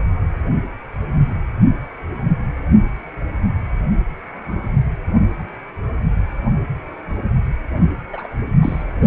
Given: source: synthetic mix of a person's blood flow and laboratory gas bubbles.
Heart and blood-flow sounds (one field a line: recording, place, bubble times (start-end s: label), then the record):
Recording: Doppler ultrasound of blood flow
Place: precordium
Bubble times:
8.13-8.27 s: bubbles
8.62-8.83 s: bubbles
From the record:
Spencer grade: 1 (occasional bubble signal discernible with the cardiac motion signal, with majority of cardiac periods free of bubbles)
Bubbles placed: only in the low amplitude regions of the cardiac cycle